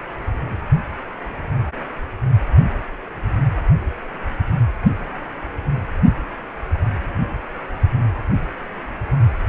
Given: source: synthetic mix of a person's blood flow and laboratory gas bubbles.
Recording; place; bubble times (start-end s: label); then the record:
Doppler ultrasound of blood flow; precordium
no bubbles
From the record:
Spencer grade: 0 (complete lack of bubble signals)